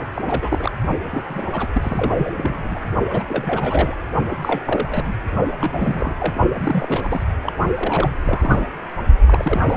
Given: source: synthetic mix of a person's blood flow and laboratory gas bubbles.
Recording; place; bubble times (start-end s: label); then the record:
Doppler ultrasound of blood flow; precordium
0.15-0.72 s: bubbles
1.09-1.44 s: bubbles
1.51-1.68 s: bubbles
1.72-2.81 s: bubbles
3.10-3.23 s: bubbles
3.28-3.97 s: bubbles
4.30-4.36 s: bubbles
4.42-5.15 s: bubbles
5.58-6.15 s: bubbles
6.20-6.34 s: bubbles
6.58-7.00 s: bubbles
7.04-7.24 s: bubbles
7.43-7.53 s: bubbles
7.76-8.17 s: bubbles
8.23-8.69 s: bubbles
9.27-9.77 s: bubbles
From the record:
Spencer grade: 3 (all of the cardiac periods contain showers or single bubble signals, but not dominating or overriding the cardiac motion signals); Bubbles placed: only in the low amplitude regions of the cardiac cycle